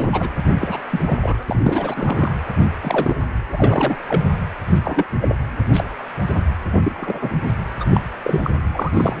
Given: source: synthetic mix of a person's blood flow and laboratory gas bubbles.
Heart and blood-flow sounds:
Doppler ultrasound of blood flow; precordium
0.00-0.09 s: bubbles
0.12-0.29 s: bubbles
0.59-0.85 s: bubbles
0.89-1.18 s: bubbles
1.21-1.43 s: bubbles
1.46-2.35 s: bubbles
2.81-3.15 s: bubbles
3.52-3.96 s: bubbles
4.08-4.24 s: bubbles
4.67-4.79 s: bubbles
4.84-5.04 s: bubbles
5.21-5.35 s: bubbles
5.73-5.84 s: bubbles
6.27-6.44 s: bubbles
6.73-6.78 s: bubbles
6.83-7.30 s: bubbles
7.44-7.55 s: bubbles
7.80-7.85 s: bubbles
7.90-8.00 s: bubbles
8.22-8.40 s: bubbles
8.43-8.50 s: bubbles
8.74-9.20 s: bubbles
From the record:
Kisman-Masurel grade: 242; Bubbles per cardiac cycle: several, 3 to 8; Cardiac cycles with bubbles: 100%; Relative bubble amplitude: moderate (0.250 to 0.450); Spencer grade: 3 (all of the cardiac periods contain showers or single bubble signals, but not dominating or overriding the cardiac motion signals); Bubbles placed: anywhere in the cardiac cycle

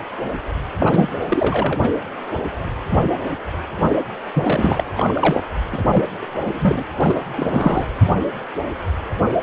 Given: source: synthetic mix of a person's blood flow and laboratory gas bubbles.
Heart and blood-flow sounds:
Doppler ultrasound of blood flow; precordium
0.80-1.09 s: bubbles
1.28-1.80 s: bubbles
1.83-1.89 s: bubbles
4.34-4.84 s: bubbles
4.94-5.44 s: bubbles
5.72-6.02 s: bubbles
6.21-6.26 s: bubbles
6.43-6.51 s: bubbles
6.54-6.83 s: bubbles
7.00-7.14 s: bubbles
7.37-7.85 s: bubbles
From the record:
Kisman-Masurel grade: 332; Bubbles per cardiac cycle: rolling drumbeat, 9 or more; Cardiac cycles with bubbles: 50 to 99%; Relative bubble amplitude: moderate (0.250 to 0.450); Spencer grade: 3 (all of the cardiac periods contain showers or single bubble signals, but not dominating or overriding the cardiac motion signals); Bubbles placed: anywhere in the cardiac cycle

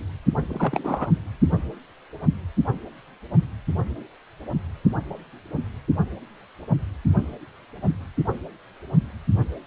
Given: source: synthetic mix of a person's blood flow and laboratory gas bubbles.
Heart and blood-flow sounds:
Doppler ultrasound of blood flow; precordium
0.50-1.06 s: bubbles
From the record:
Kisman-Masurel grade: 212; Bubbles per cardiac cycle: several, 3 to 8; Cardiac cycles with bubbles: 1 to 10%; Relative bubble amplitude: moderate (0.250 to 0.450); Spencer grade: 1 (occasional bubble signal discernible with the cardiac motion signal, with majority of cardiac periods free of bubbles); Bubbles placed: only in the low amplitude regions of the cardiac cycle

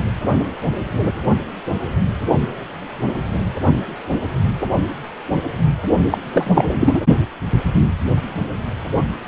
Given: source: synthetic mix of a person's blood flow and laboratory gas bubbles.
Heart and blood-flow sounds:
Doppler ultrasound of blood flow; precordium
6.11-6.18 s: bubbles
6.31-7.01 s: bubbles
From the record:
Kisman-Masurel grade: 213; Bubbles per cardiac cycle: several, 3 to 8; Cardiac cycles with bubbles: 1 to 10%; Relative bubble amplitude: loud (0.450 to 0.775); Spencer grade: 1 (occasional bubble signal discernible with the cardiac motion signal, with majority of cardiac periods free of bubbles); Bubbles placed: only in the low amplitude regions of the cardiac cycle

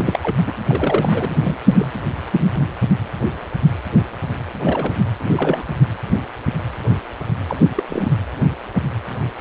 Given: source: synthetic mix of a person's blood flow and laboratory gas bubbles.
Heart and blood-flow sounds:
Doppler ultrasound of blood flow; precordium
0.00-0.19 s: bubbles
0.22-0.37 s: bubbles
0.46-0.53 s: bubbles
0.67-1.35 s: bubbles
1.42-1.58 s: bubbles
1.65-1.88 s: bubbles
4.63-4.94 s: bubbles
5.19-5.33 s: bubbles
5.35-5.63 s: bubbles
5.67-5.75 s: bubbles
7.47-7.56 s: bubbles
7.61-7.68 s: bubbles
7.75-7.83 s: bubbles
7.88-8.14 s: bubbles
From the record:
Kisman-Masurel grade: 232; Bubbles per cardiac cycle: several, 3 to 8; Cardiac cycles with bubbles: 50 to 99%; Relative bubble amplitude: moderate (0.250 to 0.450); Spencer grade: 3 (all of the cardiac periods contain showers or single bubble signals, but not dominating or overriding the cardiac motion signals); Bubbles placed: anywhere in the cardiac cycle

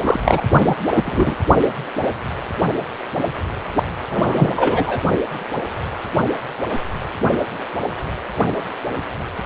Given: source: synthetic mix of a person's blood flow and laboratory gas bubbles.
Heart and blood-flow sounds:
Doppler ultrasound of blood flow; precordium
0.04-0.19 s: bubbles
0.24-0.43 s: bubbles
0.52-0.75 s: bubbles
0.95-1.36 s: bubbles
4.09-5.00 s: bubbles
From the record:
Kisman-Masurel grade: 223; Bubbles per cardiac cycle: several, 3 to 8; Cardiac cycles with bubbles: 10 to 50%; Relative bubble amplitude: loud (0.450 to 0.775); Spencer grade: 2 (many but less than half of the cardiac periods contain bubble signals, singularly or in groups); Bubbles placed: only in the low amplitude regions of the cardiac cycle

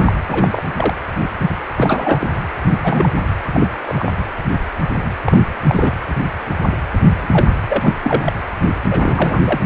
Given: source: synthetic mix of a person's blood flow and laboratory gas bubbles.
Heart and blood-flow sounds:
Doppler ultrasound of blood flow; precordium
0.00-0.12 s: bubbles
0.28-0.62 s: bubbles
0.76-0.95 s: bubbles
1.75-2.34 s: bubbles
2.83-3.09 s: bubbles
3.54-3.67 s: bubbles
3.86-4.12 s: bubbles
5.26-5.54 s: bubbles
5.67-5.92 s: bubbles
7.21-7.50 s: bubbles
7.68-7.94 s: bubbles
8.03-8.33 s: bubbles
8.90-9.42 s: bubbles
9.45-9.60 s: bubbles
From the record:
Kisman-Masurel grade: 232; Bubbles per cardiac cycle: several, 3 to 8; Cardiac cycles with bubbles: 50 to 99%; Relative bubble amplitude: moderate (0.250 to 0.450); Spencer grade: 3 (all of the cardiac periods contain showers or single bubble signals, but not dominating or overriding the cardiac motion signals); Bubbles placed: anywhere in the cardiac cycle

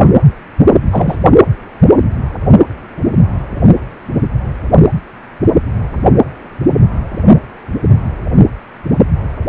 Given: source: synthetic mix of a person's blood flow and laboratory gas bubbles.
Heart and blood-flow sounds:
Doppler ultrasound of blood flow; precordium
0.92-1.17 s: bubbles
From the record:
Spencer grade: 1 (occasional bubble signal discernible with the cardiac motion signal, with majority of cardiac periods free of bubbles); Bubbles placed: only in the low amplitude regions of the cardiac cycle

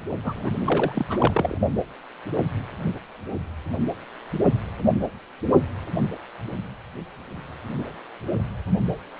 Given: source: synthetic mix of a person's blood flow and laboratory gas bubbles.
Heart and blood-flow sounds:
Doppler ultrasound of blood flow; precordium
0.24-0.33 s: bubbles
0.36-0.51 s: bubbles
0.65-1.58 s: bubbles
From the record:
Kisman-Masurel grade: 211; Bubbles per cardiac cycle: several, 3 to 8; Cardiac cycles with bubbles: 1 to 10%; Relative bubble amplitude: barely perceptible (0.100 to 0.250); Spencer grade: 1 (occasional bubble signal discernible with the cardiac motion signal, with majority of cardiac periods free of bubbles); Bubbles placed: only in the low amplitude regions of the cardiac cycle

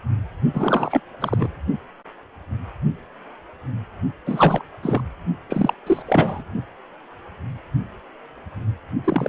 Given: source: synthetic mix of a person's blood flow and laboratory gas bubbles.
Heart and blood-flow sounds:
Doppler ultrasound of blood flow; precordium
0.53-1.02 s: bubbles
1.20-1.49 s: bubbles
4.25-4.62 s: bubbles
4.83-5.02 s: bubbles
5.50-5.74 s: bubbles
5.86-6.03 s: bubbles
6.05-6.43 s: bubbles
9.04-9.29 s: bubbles
From the record:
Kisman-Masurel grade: 332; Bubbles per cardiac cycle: rolling drumbeat, 9 or more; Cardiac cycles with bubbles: 50 to 99%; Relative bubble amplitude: moderate (0.250 to 0.450); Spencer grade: 3 (all of the cardiac periods contain showers or single bubble signals, but not dominating or overriding the cardiac motion signals); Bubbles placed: only in the low amplitude regions of the cardiac cycle

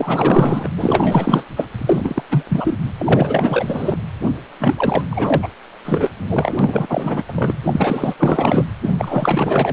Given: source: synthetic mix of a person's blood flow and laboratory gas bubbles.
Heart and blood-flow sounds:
Doppler ultrasound of blood flow; precordium
0.00-0.68 s: bubbles
0.77-1.44 s: bubbles
1.56-1.67 s: bubbles
1.78-2.23 s: bubbles
2.29-2.46 s: bubbles
2.49-2.77 s: bubbles
2.98-3.97 s: bubbles
4.59-5.04 s: bubbles
5.10-5.49 s: bubbles
5.85-6.09 s: bubbles
6.17-6.86 s: bubbles
6.89-7.23 s: bubbles
7.27-7.56 s: bubbles
7.64-8.14 s: bubbles
8.19-8.64 s: bubbles
8.81-8.91 s: bubbles
8.99-9.73 s: bubbles
From the record:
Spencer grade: 4 (maximum detectable bubble signal sounding continuously throughout systole and diastole of every cardiac period, and overriding the amplitude of the normal cardiac signals); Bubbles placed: anywhere in the cardiac cycle

